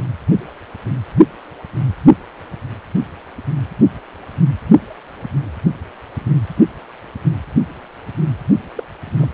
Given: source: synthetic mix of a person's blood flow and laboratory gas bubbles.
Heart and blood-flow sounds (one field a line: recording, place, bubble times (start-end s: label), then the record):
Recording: Doppler ultrasound of blood flow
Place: precordium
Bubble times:
8.76-8.83 s: bubbles
9.17-9.28 s: bubbles
From the record:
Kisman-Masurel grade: 111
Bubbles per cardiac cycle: 1 to 2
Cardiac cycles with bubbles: 1 to 10%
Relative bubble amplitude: barely perceptible (0.100 to 0.250)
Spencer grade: 1 (occasional bubble signal discernible with the cardiac motion signal, with majority of cardiac periods free of bubbles)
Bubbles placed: only in the low amplitude regions of the cardiac cycle